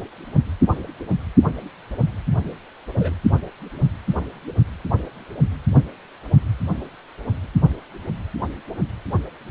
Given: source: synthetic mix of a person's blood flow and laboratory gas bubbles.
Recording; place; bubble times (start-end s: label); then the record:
Doppler ultrasound of blood flow; precordium
2.99-3.13 s: bubbles
From the record:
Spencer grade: 2 (many but less than half of the cardiac periods contain bubble signals, singularly or in groups); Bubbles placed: only in the low amplitude regions of the cardiac cycle